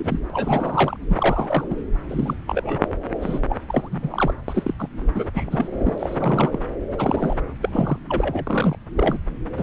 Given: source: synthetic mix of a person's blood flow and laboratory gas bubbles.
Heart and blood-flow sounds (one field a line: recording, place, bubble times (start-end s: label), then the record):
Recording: Doppler ultrasound of blood flow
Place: subclavian vein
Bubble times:
0.00-0.19 s: bubbles
0.29-0.97 s: bubbles
1.08-1.67 s: bubbles
1.70-1.76 s: bubbles
2.08-2.35 s: bubbles
2.47-2.87 s: bubbles
3.21-3.40 s: bubbles
3.49-3.56 s: bubbles
3.68-3.88 s: bubbles
3.91-4.34 s: bubbles
4.48-4.75 s: bubbles
4.79-4.88 s: bubbles
5.15-5.31 s: bubbles
5.33-6.59 s: bubbles
6.91-7.37 s: bubbles
7.62-7.98 s: bubbles
8.08-8.79 s: bubbles
8.96-9.18 s: bubbles
9.57-9.62 s: bubbles
From the record:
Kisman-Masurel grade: 243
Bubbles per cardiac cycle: several, 3 to 8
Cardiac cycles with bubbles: 100%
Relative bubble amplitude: loud (0.450 to 0.775)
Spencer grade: 3 (all of the cardiac periods contain showers or single bubble signals, but not dominating or overriding the cardiac motion signals)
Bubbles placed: anywhere in the cardiac cycle